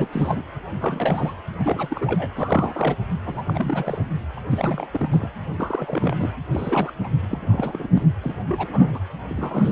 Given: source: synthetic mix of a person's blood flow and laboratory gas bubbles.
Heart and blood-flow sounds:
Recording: Doppler ultrasound of blood flow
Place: precordium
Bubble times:
0.00-0.08 s: bubbles
0.12-0.43 s: bubbles
0.79-1.34 s: bubbles
1.57-2.31 s: bubbles
2.35-2.96 s: bubbles
3.25-3.43 s: bubbles
3.48-4.04 s: bubbles
4.37-4.40 s: bubbles
4.50-4.87 s: bubbles
4.92-5.28 s: bubbles
5.56-6.33 s: bubbles
6.51-6.92 s: bubbles
7.03-7.09 s: bubbles
7.29-8.09 s: bubbles
8.22-8.34 s: bubbles
8.46-9.00 s: bubbles
9.29-9.72 s: bubbles
From the record:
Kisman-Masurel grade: 342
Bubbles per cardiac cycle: rolling drumbeat, 9 or more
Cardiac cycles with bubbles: 100%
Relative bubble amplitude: moderate (0.250 to 0.450)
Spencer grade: 3 (all of the cardiac periods contain showers or single bubble signals, but not dominating or overriding the cardiac motion signals)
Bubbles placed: anywhere in the cardiac cycle

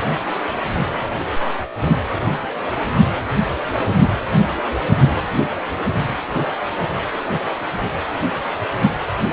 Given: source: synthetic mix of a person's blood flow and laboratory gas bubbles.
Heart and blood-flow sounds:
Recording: Doppler ultrasound of blood flow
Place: precordium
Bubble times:
no bubbles
From the record:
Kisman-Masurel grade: 000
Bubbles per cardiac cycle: 0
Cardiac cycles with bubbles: 0%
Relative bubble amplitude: no bubbles discernible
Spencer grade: 0 (complete lack of bubble signals)

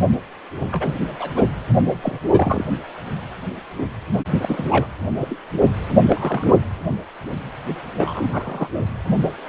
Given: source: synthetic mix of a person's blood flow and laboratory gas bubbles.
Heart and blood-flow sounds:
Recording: Doppler ultrasound of blood flow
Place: precordium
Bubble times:
0.72-0.96 s: bubbles
1.19-1.31 s: bubbles
1.36-1.47 s: bubbles
2.02-2.20 s: bubbles
2.30-2.65 s: bubbles
4.42-4.87 s: bubbles
5.17-5.39 s: bubbles
6.09-6.47 s: bubbles
7.97-8.68 s: bubbles
From the record:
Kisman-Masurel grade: 232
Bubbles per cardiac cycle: several, 3 to 8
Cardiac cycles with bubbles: 50 to 99%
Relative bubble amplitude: moderate (0.250 to 0.450)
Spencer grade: 3 (all of the cardiac periods contain showers or single bubble signals, but not dominating or overriding the cardiac motion signals)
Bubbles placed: only in the low amplitude regions of the cardiac cycle

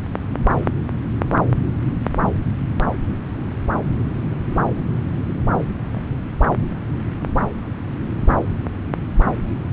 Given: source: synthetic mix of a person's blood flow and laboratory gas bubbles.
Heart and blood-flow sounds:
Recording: Doppler ultrasound of blood flow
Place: subclavian vein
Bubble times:
5.94-6.02 s: bubbles
From the record:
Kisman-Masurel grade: 121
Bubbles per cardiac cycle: 1 to 2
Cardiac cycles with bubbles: 10 to 50%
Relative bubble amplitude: barely perceptible (0.100 to 0.250)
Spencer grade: 2 (many but less than half of the cardiac periods contain bubble signals, singularly or in groups)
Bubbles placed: anywhere in the cardiac cycle

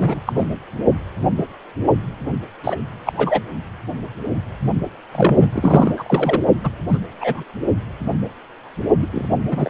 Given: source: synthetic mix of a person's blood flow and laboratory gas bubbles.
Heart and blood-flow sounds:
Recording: Doppler ultrasound of blood flow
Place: precordium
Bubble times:
0.00-0.20 s: bubbles
0.27-0.48 s: bubbles
2.63-2.76 s: bubbles
3.06-3.12 s: bubbles
3.17-3.42 s: bubbles
5.12-5.49 s: bubbles
5.52-5.92 s: bubbles
5.96-6.42 s: bubbles
6.63-6.70 s: bubbles
6.88-6.98 s: bubbles
7.21-7.41 s: bubbles
9.02-9.07 s: bubbles
9.12-9.27 s: bubbles
9.47-9.70 s: bubbles
From the record:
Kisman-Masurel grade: 233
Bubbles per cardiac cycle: several, 3 to 8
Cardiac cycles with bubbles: 50 to 99%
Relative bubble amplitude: loud (0.450 to 0.775)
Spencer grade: 3 (all of the cardiac periods contain showers or single bubble signals, but not dominating or overriding the cardiac motion signals)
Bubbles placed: only in the low amplitude regions of the cardiac cycle

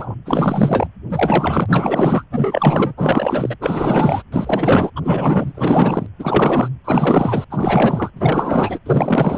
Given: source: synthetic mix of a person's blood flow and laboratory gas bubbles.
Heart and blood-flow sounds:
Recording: Doppler ultrasound of blood flow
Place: precordium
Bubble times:
0.00-0.15 s: bubbles
0.25-0.87 s: bubbles
1.10-2.24 s: bubbles
2.30-2.94 s: bubbles
2.97-3.55 s: bubbles
3.60-4.22 s: bubbles
4.32-4.90 s: bubbles
4.96-6.06 s: bubbles
6.19-6.68 s: bubbles
6.84-7.45 s: bubbles
7.50-8.11 s: bubbles
8.15-8.79 s: bubbles
8.86-9.38 s: bubbles
From the record:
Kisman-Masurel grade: 444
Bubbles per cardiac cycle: continuous sound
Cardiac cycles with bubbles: 100%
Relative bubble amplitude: maximal (0.775 to 0.999)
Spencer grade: 4 (maximum detectable bubble signal sounding continuously throughout systole and diastole of every cardiac period, and overriding the amplitude of the normal cardiac signals)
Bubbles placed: anywhere in the cardiac cycle

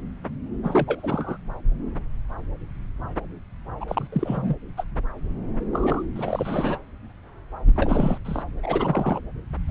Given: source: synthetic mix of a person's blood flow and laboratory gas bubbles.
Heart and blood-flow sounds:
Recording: Doppler ultrasound of blood flow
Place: subclavian vein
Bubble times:
0.64-1.37 s: bubbles
3.81-3.85 s: bubbles
3.88-4.07 s: bubbles
4.12-4.55 s: bubbles
4.77-4.84 s: bubbles
5.72-6.03 s: bubbles
6.15-6.78 s: bubbles
7.75-8.18 s: bubbles
8.25-8.43 s: bubbles
8.62-9.20 s: bubbles
9.69-9.71 s: bubbles
From the record:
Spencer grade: 3 (all of the cardiac periods contain showers or single bubble signals, but not dominating or overriding the cardiac motion signals)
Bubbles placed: anywhere in the cardiac cycle

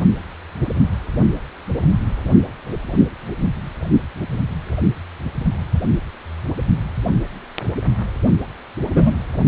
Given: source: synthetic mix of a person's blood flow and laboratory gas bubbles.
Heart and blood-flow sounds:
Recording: Doppler ultrasound of blood flow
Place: precordium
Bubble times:
8.94-9.13 s: bubbles
From the record:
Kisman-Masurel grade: 123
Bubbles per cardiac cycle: 1 to 2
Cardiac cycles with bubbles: 10 to 50%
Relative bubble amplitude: loud (0.450 to 0.775)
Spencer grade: 2 (many but less than half of the cardiac periods contain bubble signals, singularly or in groups)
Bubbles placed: anywhere in the cardiac cycle

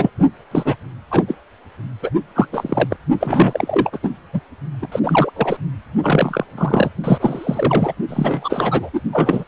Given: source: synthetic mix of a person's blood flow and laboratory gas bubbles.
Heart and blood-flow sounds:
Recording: Doppler ultrasound of blood flow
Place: precordium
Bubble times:
0.00-0.10 s: bubbles
0.51-0.76 s: bubbles
1.10-1.23 s: bubbles
1.28-1.34 s: bubbles
2.02-2.10 s: bubbles
2.35-2.47 s: bubbles
2.52-2.96 s: bubbles
3.20-3.98 s: bubbles
4.03-4.11 s: bubbles
4.33-4.41 s: bubbles
4.82-4.88 s: bubbles
4.92-5.00 s: bubbles
5.03-5.31 s: bubbles
5.36-5.57 s: bubbles
6.03-6.46 s: bubbles
6.58-6.89 s: bubbles
7.04-7.93 s: bubbles
8.09-8.90 s: bubbles
8.93-9.00 s: bubbles
9.12-9.44 s: bubbles
From the record:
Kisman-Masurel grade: 343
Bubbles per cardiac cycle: rolling drumbeat, 9 or more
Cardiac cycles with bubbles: 100%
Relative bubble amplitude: loud (0.450 to 0.775)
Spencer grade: 3 (all of the cardiac periods contain showers or single bubble signals, but not dominating or overriding the cardiac motion signals)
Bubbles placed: only in the low amplitude regions of the cardiac cycle

